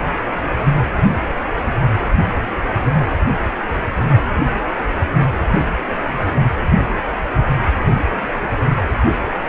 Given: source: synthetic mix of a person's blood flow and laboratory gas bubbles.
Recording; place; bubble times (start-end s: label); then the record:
Doppler ultrasound of blood flow; precordium
no bubbles
From the record:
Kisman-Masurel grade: 000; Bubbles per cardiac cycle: 0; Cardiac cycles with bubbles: 0%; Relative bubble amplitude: no bubbles discernible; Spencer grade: 0 (complete lack of bubble signals)